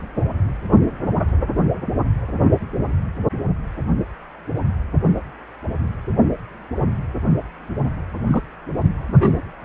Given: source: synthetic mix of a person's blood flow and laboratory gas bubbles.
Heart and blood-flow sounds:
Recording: Doppler ultrasound of blood flow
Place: precordium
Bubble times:
8.27-8.42 s: bubbles
9.07-9.33 s: bubbles
From the record:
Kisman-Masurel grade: 122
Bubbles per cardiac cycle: 1 to 2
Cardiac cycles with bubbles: 10 to 50%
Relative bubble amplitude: moderate (0.250 to 0.450)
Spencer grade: 2 (many but less than half of the cardiac periods contain bubble signals, singularly or in groups)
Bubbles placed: anywhere in the cardiac cycle

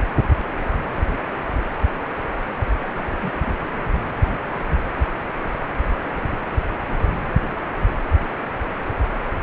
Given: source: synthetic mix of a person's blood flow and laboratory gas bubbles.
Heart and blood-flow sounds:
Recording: Doppler ultrasound of blood flow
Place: precordium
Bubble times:
2.95-3.32 s: bubbles
3.44-3.59 s: bubbles
From the record:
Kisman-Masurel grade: 221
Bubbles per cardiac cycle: several, 3 to 8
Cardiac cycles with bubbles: 10 to 50%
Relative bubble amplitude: barely perceptible (0.100 to 0.250)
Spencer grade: 2 (many but less than half of the cardiac periods contain bubble signals, singularly or in groups)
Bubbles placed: anywhere in the cardiac cycle

